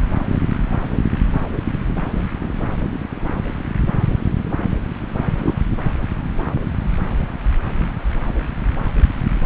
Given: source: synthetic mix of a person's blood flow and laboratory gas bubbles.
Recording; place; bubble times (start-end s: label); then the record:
Doppler ultrasound of blood flow; subclavian vein
5.40-5.58 s: bubbles
From the record:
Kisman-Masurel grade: 112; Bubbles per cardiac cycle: 1 to 2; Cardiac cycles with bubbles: 1 to 10%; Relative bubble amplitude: moderate (0.250 to 0.450); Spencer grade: 1 (occasional bubble signal discernible with the cardiac motion signal, with majority of cardiac periods free of bubbles); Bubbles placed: anywhere in the cardiac cycle